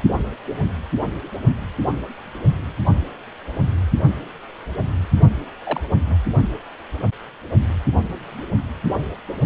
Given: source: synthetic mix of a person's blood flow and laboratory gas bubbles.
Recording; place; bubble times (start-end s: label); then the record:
Doppler ultrasound of blood flow; precordium
5.64-5.81 s: bubbles
6.08-6.17 s: bubbles
From the record:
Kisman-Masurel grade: 121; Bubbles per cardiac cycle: 1 to 2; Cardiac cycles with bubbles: 10 to 50%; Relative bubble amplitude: barely perceptible (0.100 to 0.250); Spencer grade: 2 (many but less than half of the cardiac periods contain bubble signals, singularly or in groups); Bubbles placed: anywhere in the cardiac cycle